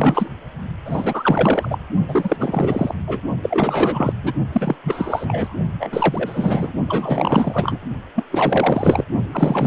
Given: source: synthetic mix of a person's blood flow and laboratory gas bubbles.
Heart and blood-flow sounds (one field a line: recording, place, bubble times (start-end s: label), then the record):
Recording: Doppler ultrasound of blood flow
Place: precordium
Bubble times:
0.00-0.31 s: bubbles
0.85-1.79 s: bubbles
2.08-2.36 s: bubbles
2.39-2.94 s: bubbles
3.06-3.21 s: bubbles
3.42-4.14 s: bubbles
4.23-4.33 s: bubbles
4.53-4.76 s: bubbles
4.83-5.56 s: bubbles
5.79-6.73 s: bubbles
6.88-7.79 s: bubbles
8.15-8.23 s: bubbles
8.31-9.04 s: bubbles
9.31-9.67 s: bubbles
From the record:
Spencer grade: 4 (maximum detectable bubble signal sounding continuously throughout systole and diastole of every cardiac period, and overriding the amplitude of the normal cardiac signals)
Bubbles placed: only in the low amplitude regions of the cardiac cycle